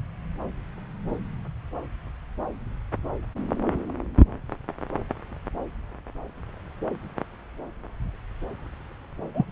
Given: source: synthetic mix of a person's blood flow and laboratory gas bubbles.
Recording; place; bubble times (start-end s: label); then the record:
Doppler ultrasound of blood flow; subclavian vein
9.33-9.46 s: bubbles
From the record:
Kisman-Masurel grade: 122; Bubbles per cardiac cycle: 1 to 2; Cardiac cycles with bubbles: 10 to 50%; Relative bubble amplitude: moderate (0.250 to 0.450); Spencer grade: 2 (many but less than half of the cardiac periods contain bubble signals, singularly or in groups); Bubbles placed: anywhere in the cardiac cycle